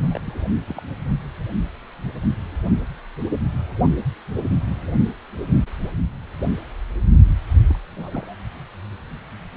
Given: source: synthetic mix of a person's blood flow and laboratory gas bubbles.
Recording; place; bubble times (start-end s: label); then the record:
Doppler ultrasound of blood flow; precordium
0.11-0.18 s: bubbles
0.26-0.46 s: bubbles
0.67-0.81 s: bubbles
7.69-7.77 s: bubbles
7.95-8.36 s: bubbles
From the record:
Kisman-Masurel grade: 221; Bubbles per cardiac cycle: several, 3 to 8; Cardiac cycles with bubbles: 10 to 50%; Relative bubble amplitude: barely perceptible (0.100 to 0.250); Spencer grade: 2 (many but less than half of the cardiac periods contain bubble signals, singularly or in groups); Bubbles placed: only in the low amplitude regions of the cardiac cycle